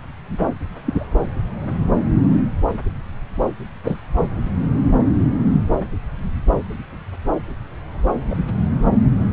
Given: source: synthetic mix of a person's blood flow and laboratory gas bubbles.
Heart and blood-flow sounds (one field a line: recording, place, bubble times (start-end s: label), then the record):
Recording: Doppler ultrasound of blood flow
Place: subclavian vein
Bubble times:
0.86-1.06 s: bubbles
3.84-3.97 s: bubbles
8.30-8.36 s: bubbles
From the record:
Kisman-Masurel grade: 122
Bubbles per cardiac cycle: 1 to 2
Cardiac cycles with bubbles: 10 to 50%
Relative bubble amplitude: moderate (0.250 to 0.450)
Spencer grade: 2 (many but less than half of the cardiac periods contain bubble signals, singularly or in groups)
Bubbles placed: anywhere in the cardiac cycle